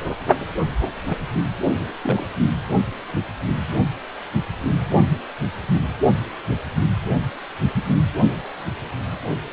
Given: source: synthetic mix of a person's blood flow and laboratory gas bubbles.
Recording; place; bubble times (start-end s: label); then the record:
Doppler ultrasound of blood flow; precordium
1.07-1.18 s: bubbles
2.02-2.27 s: bubbles
From the record:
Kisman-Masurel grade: 121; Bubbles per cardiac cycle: 1 to 2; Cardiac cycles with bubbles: 10 to 50%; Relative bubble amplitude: barely perceptible (0.100 to 0.250); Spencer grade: 2 (many but less than half of the cardiac periods contain bubble signals, singularly or in groups); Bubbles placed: only in the low amplitude regions of the cardiac cycle